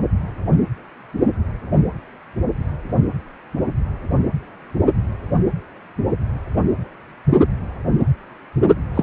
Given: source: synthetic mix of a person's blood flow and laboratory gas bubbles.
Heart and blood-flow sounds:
Doppler ultrasound of blood flow; precordium
8.94-9.03 s: bubbles
From the record:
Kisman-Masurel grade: 113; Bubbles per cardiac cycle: 1 to 2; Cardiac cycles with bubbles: 1 to 10%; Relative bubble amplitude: loud (0.450 to 0.775); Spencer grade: 1 (occasional bubble signal discernible with the cardiac motion signal, with majority of cardiac periods free of bubbles); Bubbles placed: anywhere in the cardiac cycle

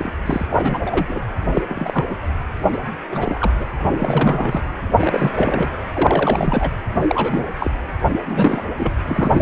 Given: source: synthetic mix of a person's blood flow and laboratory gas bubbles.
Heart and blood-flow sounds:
Doppler ultrasound of blood flow; precordium
0.00-0.12 s: bubbles
0.26-0.46 s: bubbles
0.51-0.78 s: bubbles
0.85-1.19 s: bubbles
1.53-1.62 s: bubbles
1.69-2.05 s: bubbles
2.08-2.16 s: bubbles
2.71-2.79 s: bubbles
3.10-3.51 s: bubbles
3.59-3.64 s: bubbles
3.92-4.69 s: bubbles
5.00-5.31 s: bubbles
5.37-5.70 s: bubbles
5.94-6.71 s: bubbles
7.00-7.44 s: bubbles
7.58-7.71 s: bubbles
8.12-8.19 s: bubbles
8.25-8.64 s: bubbles
8.78-8.93 s: bubbles
9.05-9.41 s: bubbles
From the record:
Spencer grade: 3 (all of the cardiac periods contain showers or single bubble signals, but not dominating or overriding the cardiac motion signals); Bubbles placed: anywhere in the cardiac cycle

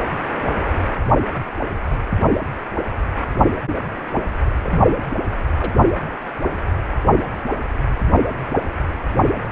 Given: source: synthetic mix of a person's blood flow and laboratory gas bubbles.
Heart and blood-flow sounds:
Doppler ultrasound of blood flow; precordium
4.63-4.97 s: bubbles
5.58-5.73 s: bubbles
9.43-9.48 s: bubbles
From the record:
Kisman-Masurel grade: 121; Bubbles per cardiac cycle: 1 to 2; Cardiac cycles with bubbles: 10 to 50%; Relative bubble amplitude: barely perceptible (0.100 to 0.250); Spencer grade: 2 (many but less than half of the cardiac periods contain bubble signals, singularly or in groups); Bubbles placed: only in the low amplitude regions of the cardiac cycle

